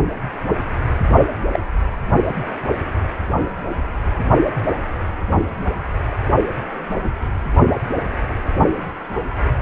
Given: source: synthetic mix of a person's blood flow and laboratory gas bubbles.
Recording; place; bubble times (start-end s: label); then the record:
Doppler ultrasound of blood flow; precordium
1.53-1.59 s: bubbles
From the record:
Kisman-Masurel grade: 122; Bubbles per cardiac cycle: 1 to 2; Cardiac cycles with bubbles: 10 to 50%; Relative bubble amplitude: moderate (0.250 to 0.450); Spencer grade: 2 (many but less than half of the cardiac periods contain bubble signals, singularly or in groups); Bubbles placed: only in the low amplitude regions of the cardiac cycle